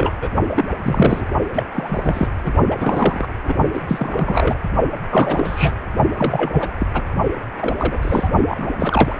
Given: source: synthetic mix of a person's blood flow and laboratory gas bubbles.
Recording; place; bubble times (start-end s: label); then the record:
Doppler ultrasound of blood flow; precordium
0.00-0.11 s: bubbles
0.21-0.30 s: bubbles
0.47-0.63 s: bubbles
0.82-1.25 s: bubbles
1.53-1.64 s: bubbles
1.73-2.28 s: bubbles
2.44-2.54 s: bubbles
2.70-3.27 s: bubbles
3.45-3.53 s: bubbles
3.73-3.82 s: bubbles
3.88-4.57 s: bubbles
5.09-5.74 s: bubbles
6.17-6.72 s: bubbles
6.78-6.87 s: bubbles
6.94-7.03 s: bubbles
7.58-8.29 s: bubbles
8.48-8.69 s: bubbles
8.78-9.15 s: bubbles
From the record:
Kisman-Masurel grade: 343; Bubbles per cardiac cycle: rolling drumbeat, 9 or more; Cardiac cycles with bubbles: 100%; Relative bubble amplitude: loud (0.450 to 0.775); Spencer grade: 3 (all of the cardiac periods contain showers or single bubble signals, but not dominating or overriding the cardiac motion signals); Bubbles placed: only in the low amplitude regions of the cardiac cycle